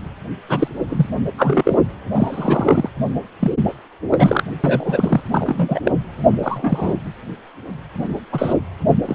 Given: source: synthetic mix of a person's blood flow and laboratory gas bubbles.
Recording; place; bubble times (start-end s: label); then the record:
Doppler ultrasound of blood flow; precordium
0.48-0.68 s: bubbles
0.89-1.07 s: bubbles
1.38-1.78 s: bubbles
2.13-2.88 s: bubbles
3.39-3.51 s: bubbles
4.11-4.44 s: bubbles
4.64-5.23 s: bubbles
5.31-5.80 s: bubbles
5.85-5.92 s: bubbles
6.26-6.94 s: bubbles
8.32-8.53 s: bubbles
9.05-9.15 s: bubbles
From the record:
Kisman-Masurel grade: 243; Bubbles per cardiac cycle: several, 3 to 8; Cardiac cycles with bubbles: 100%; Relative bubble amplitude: loud (0.450 to 0.775); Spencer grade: 3 (all of the cardiac periods contain showers or single bubble signals, but not dominating or overriding the cardiac motion signals); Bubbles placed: anywhere in the cardiac cycle